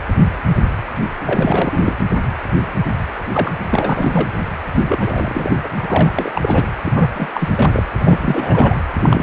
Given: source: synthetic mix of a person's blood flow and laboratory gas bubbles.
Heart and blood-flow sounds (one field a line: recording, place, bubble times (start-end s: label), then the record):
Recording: Doppler ultrasound of blood flow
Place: precordium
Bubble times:
1.25-1.96 s: bubbles
3.33-3.50 s: bubbles
3.69-4.28 s: bubbles
4.76-5.57 s: bubbles
5.63-5.69 s: bubbles
5.78-6.16 s: bubbles
6.19-6.32 s: bubbles
6.35-6.65 s: bubbles
6.85-7.29 s: bubbles
7.34-7.49 s: bubbles
7.57-7.83 s: bubbles
8.00-8.75 s: bubbles
8.99-9.23 s: bubbles
From the record:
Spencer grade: 3 (all of the cardiac periods contain showers or single bubble signals, but not dominating or overriding the cardiac motion signals)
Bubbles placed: anywhere in the cardiac cycle